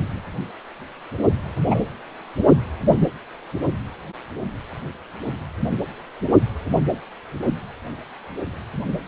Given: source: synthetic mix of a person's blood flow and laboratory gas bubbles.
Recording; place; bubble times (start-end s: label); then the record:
Doppler ultrasound of blood flow; precordium
1.70-1.80 s: bubbles
From the record:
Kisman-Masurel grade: 113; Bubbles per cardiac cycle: 1 to 2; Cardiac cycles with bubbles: 1 to 10%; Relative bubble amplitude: loud (0.450 to 0.775); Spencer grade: 1 (occasional bubble signal discernible with the cardiac motion signal, with majority of cardiac periods free of bubbles); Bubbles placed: only in the low amplitude regions of the cardiac cycle